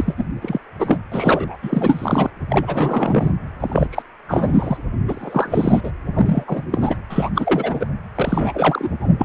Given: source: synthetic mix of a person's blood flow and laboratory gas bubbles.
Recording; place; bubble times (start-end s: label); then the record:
Doppler ultrasound of blood flow; precordium
0.00-0.25 s: bubbles
0.42-0.59 s: bubbles
0.79-0.97 s: bubbles
1.12-1.58 s: bubbles
1.62-2.30 s: bubbles
2.49-3.36 s: bubbles
3.60-3.87 s: bubbles
3.90-4.03 s: bubbles
4.28-4.77 s: bubbles
5.08-5.81 s: bubbles
5.83-5.91 s: bubbles
6.15-6.44 s: bubbles
6.47-6.63 s: bubbles
6.72-6.98 s: bubbles
7.10-7.31 s: bubbles
7.35-7.87 s: bubbles
8.15-8.89 s: bubbles
9.00-9.16 s: bubbles
9.18-9.25 s: bubbles
From the record:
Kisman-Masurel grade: 343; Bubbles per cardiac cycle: rolling drumbeat, 9 or more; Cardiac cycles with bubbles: 100%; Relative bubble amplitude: loud (0.450 to 0.775); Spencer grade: 3 (all of the cardiac periods contain showers or single bubble signals, but not dominating or overriding the cardiac motion signals); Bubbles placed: anywhere in the cardiac cycle